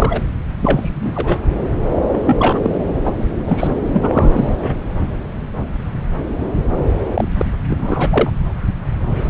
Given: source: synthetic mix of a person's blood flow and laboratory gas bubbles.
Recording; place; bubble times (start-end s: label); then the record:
Doppler ultrasound of blood flow; subclavian vein
0.00-0.29 s: bubbles
0.60-1.42 s: bubbles
2.12-2.79 s: bubbles
3.05-3.11 s: bubbles
3.45-3.70 s: bubbles
3.93-4.77 s: bubbles
7.15-7.28 s: bubbles
7.38-7.46 s: bubbles
7.68-8.30 s: bubbles
From the record:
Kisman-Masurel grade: 233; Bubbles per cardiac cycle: several, 3 to 8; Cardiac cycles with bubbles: 50 to 99%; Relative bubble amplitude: loud (0.450 to 0.775); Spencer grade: 3 (all of the cardiac periods contain showers or single bubble signals, but not dominating or overriding the cardiac motion signals); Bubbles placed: anywhere in the cardiac cycle